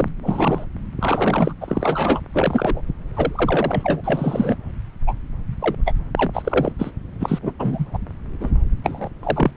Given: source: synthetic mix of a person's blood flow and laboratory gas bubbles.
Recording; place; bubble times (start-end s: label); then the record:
Doppler ultrasound of blood flow; subclavian vein
0.00-0.08 s: bubbles
0.23-0.66 s: bubbles
1.00-1.53 s: bubbles
1.61-2.23 s: bubbles
2.34-2.81 s: bubbles
3.15-4.01 s: bubbles
4.03-4.56 s: bubbles
5.07-5.13 s: bubbles
5.59-5.75 s: bubbles
5.85-5.93 s: bubbles
6.17-6.31 s: bubbles
6.33-6.72 s: bubbles
6.79-6.91 s: bubbles
7.20-7.39 s: bubbles
7.42-7.53 s: bubbles
7.59-7.86 s: bubbles
7.93-7.97 s: bubbles
8.40-8.49 s: bubbles
8.83-9.09 s: bubbles
9.23-9.51 s: bubbles
From the record:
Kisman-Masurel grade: 242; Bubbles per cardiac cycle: several, 3 to 8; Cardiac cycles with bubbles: 100%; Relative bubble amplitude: moderate (0.250 to 0.450); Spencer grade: 3 (all of the cardiac periods contain showers or single bubble signals, but not dominating or overriding the cardiac motion signals); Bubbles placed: anywhere in the cardiac cycle